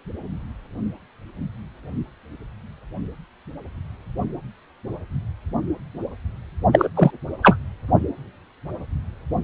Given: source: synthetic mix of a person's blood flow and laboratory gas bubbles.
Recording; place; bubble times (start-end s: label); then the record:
Doppler ultrasound of blood flow; precordium
6.72-6.89 s: bubbles
6.96-7.11 s: bubbles
7.43-7.57 s: bubbles
From the record:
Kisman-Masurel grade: 213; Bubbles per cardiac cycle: several, 3 to 8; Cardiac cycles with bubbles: 1 to 10%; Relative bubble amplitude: loud (0.450 to 0.775); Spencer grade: 1 (occasional bubble signal discernible with the cardiac motion signal, with majority of cardiac periods free of bubbles); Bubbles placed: only in the low amplitude regions of the cardiac cycle